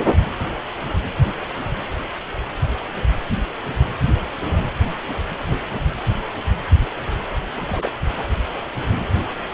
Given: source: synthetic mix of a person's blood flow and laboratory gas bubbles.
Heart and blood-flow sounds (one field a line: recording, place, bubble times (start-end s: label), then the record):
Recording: Doppler ultrasound of blood flow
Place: precordium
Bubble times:
7.57-7.91 s: bubbles
8.16-8.26 s: bubbles
From the record:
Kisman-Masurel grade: 211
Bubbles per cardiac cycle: several, 3 to 8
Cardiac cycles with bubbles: 1 to 10%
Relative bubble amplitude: barely perceptible (0.100 to 0.250)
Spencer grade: 1 (occasional bubble signal discernible with the cardiac motion signal, with majority of cardiac periods free of bubbles)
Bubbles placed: anywhere in the cardiac cycle